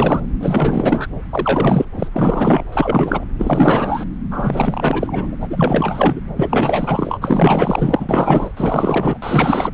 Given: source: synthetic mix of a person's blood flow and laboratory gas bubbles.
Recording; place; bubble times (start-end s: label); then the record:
Doppler ultrasound of blood flow; subclavian vein
0.00-0.20 s: bubbles
0.40-1.08 s: bubbles
1.29-1.85 s: bubbles
1.94-2.08 s: bubbles
2.12-2.64 s: bubbles
2.72-3.25 s: bubbles
3.38-4.04 s: bubbles
4.31-5.36 s: bubbles
5.40-6.20 s: bubbles
6.36-7.18 s: bubbles
7.21-8.51 s: bubbles
8.56-9.18 s: bubbles
9.22-9.71 s: bubbles
From the record:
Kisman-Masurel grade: 444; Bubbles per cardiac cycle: continuous sound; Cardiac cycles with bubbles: 100%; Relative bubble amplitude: maximal (0.775 to 0.999); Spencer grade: 4 (maximum detectable bubble signal sounding continuously throughout systole and diastole of every cardiac period, and overriding the amplitude of the normal cardiac signals); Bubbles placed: anywhere in the cardiac cycle